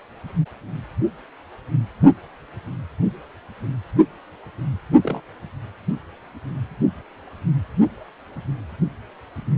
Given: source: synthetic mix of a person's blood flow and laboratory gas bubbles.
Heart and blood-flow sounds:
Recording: Doppler ultrasound of blood flow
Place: precordium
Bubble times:
5.04-5.21 s: bubbles
From the record:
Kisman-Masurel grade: 121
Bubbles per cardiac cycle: 1 to 2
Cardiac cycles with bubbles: 10 to 50%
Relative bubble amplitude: barely perceptible (0.100 to 0.250)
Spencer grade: 2 (many but less than half of the cardiac periods contain bubble signals, singularly or in groups)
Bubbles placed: only in the low amplitude regions of the cardiac cycle

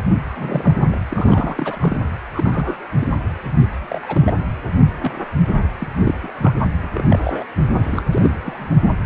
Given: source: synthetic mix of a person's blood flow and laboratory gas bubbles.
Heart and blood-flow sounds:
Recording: Doppler ultrasound of blood flow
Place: precordium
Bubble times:
0.36-0.97 s: bubbles
1.09-2.03 s: bubbles
2.35-2.86 s: bubbles
3.00-3.07 s: bubbles
3.78-4.33 s: bubbles
4.98-5.21 s: bubbles
5.79-5.88 s: bubbles
6.04-6.15 s: bubbles
6.22-6.30 s: bubbles
6.37-6.54 s: bubbles
6.82-6.89 s: bubbles
6.93-7.46 s: bubbles
7.83-8.03 s: bubbles
8.12-8.38 s: bubbles
8.44-8.70 s: bubbles
8.83-8.88 s: bubbles
From the record:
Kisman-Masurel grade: 232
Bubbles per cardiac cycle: several, 3 to 8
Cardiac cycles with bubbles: 50 to 99%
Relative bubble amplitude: moderate (0.250 to 0.450)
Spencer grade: 3 (all of the cardiac periods contain showers or single bubble signals, but not dominating or overriding the cardiac motion signals)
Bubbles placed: anywhere in the cardiac cycle

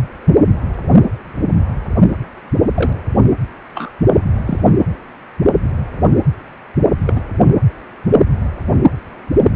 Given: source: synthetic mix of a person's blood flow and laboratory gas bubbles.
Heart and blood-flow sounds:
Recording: Doppler ultrasound of blood flow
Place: precordium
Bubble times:
2.75-2.93 s: bubbles
3.75-3.92 s: bubbles
4.17-4.21 s: bubbles
4.46-4.58 s: bubbles
4.66-4.73 s: bubbles
7.05-7.21 s: bubbles
From the record:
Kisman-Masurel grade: 122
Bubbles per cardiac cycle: 1 to 2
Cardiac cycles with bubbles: 10 to 50%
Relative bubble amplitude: moderate (0.250 to 0.450)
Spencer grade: 2 (many but less than half of the cardiac periods contain bubble signals, singularly or in groups)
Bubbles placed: anywhere in the cardiac cycle

